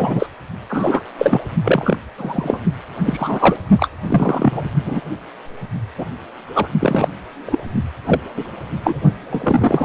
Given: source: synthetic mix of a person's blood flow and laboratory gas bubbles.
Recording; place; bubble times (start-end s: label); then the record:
Doppler ultrasound of blood flow; precordium
0.00-0.27 s: bubbles
0.69-1.01 s: bubbles
1.18-1.40 s: bubbles
1.64-1.99 s: bubbles
2.18-2.60 s: bubbles
3.04-3.56 s: bubbles
3.77-3.89 s: bubbles
4.07-4.66 s: bubbles
4.84-5.01 s: bubbles
5.97-6.06 s: bubbles
6.55-6.68 s: bubbles
6.79-7.08 s: bubbles
7.46-7.61 s: bubbles
8.06-8.21 s: bubbles
8.37-8.44 s: bubbles
8.84-9.01 s: bubbles
9.29-9.85 s: bubbles
From the record:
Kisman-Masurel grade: 243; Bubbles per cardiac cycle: several, 3 to 8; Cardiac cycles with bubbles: 100%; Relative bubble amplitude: loud (0.450 to 0.775); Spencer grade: 3 (all of the cardiac periods contain showers or single bubble signals, but not dominating or overriding the cardiac motion signals); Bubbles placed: only in the low amplitude regions of the cardiac cycle